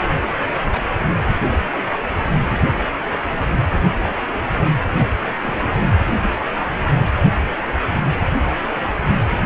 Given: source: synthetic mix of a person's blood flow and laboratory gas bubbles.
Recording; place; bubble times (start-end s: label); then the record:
Doppler ultrasound of blood flow; precordium
0.72-0.81 s: bubbles
4.04-4.12 s: bubbles
5.00-5.08 s: bubbles
5.42-5.89 s: bubbles
From the record:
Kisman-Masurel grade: 121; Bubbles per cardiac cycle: 1 to 2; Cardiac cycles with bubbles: 10 to 50%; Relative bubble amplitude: barely perceptible (0.100 to 0.250); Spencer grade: 2 (many but less than half of the cardiac periods contain bubble signals, singularly or in groups); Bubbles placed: anywhere in the cardiac cycle